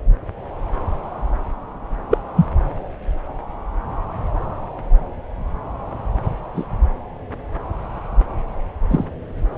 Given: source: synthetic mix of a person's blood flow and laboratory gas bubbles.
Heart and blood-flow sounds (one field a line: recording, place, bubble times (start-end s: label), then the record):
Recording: Doppler ultrasound of blood flow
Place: subclavian vein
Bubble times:
2.10-2.18 s: bubbles
2.36-2.46 s: bubbles
6.55-6.65 s: bubbles
8.90-9.05 s: bubbles
From the record:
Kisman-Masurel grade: 123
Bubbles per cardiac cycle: 1 to 2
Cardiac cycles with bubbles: 10 to 50%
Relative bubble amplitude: loud (0.450 to 0.775)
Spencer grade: 2 (many but less than half of the cardiac periods contain bubble signals, singularly or in groups)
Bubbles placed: anywhere in the cardiac cycle